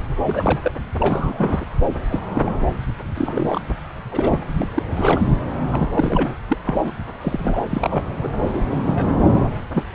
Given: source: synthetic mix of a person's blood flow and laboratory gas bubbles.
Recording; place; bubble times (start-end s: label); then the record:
Doppler ultrasound of blood flow; subclavian vein
0.23-0.72 s: bubbles
0.99-1.65 s: bubbles
2.10-2.20 s: bubbles
2.35-2.42 s: bubbles
2.45-2.52 s: bubbles
3.15-3.61 s: bubbles
4.11-4.42 s: bubbles
4.57-4.68 s: bubbles
4.74-4.83 s: bubbles
4.95-5.21 s: bubbles
5.70-6.35 s: bubbles
6.48-6.58 s: bubbles
6.65-6.77 s: bubbles
6.84-6.92 s: bubbles
7.21-7.60 s: bubbles
7.70-8.04 s: bubbles
8.23-8.29 s: bubbles
8.43-8.61 s: bubbles
8.70-8.78 s: bubbles
8.83-9.13 s: bubbles
9.32-9.48 s: bubbles
9.74-9.84 s: bubbles
From the record:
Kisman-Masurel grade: 242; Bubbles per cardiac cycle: several, 3 to 8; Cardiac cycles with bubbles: 100%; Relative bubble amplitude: moderate (0.250 to 0.450); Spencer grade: 3 (all of the cardiac periods contain showers or single bubble signals, but not dominating or overriding the cardiac motion signals); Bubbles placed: anywhere in the cardiac cycle